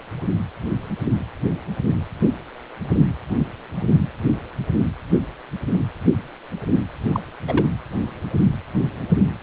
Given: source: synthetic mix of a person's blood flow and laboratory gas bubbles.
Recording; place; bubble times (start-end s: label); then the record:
Doppler ultrasound of blood flow; precordium
7.08-7.20 s: bubbles
7.47-7.67 s: bubbles
From the record:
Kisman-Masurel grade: 212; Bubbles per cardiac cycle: several, 3 to 8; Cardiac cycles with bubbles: 1 to 10%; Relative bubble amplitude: moderate (0.250 to 0.450); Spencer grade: 1 (occasional bubble signal discernible with the cardiac motion signal, with majority of cardiac periods free of bubbles); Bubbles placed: anywhere in the cardiac cycle